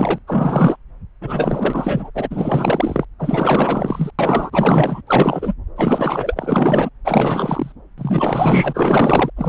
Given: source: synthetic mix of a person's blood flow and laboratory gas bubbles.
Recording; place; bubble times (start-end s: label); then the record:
Doppler ultrasound of blood flow; subclavian vein
0.00-0.18 s: bubbles
0.27-0.76 s: bubbles
1.21-2.10 s: bubbles
2.15-3.05 s: bubbles
3.19-4.10 s: bubbles
4.18-5.01 s: bubbles
5.07-5.54 s: bubbles
5.76-6.89 s: bubbles
7.04-7.72 s: bubbles
7.98-9.30 s: bubbles
9.36-9.49 s: bubbles
From the record:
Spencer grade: 4 (maximum detectable bubble signal sounding continuously throughout systole and diastole of every cardiac period, and overriding the amplitude of the normal cardiac signals); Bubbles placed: anywhere in the cardiac cycle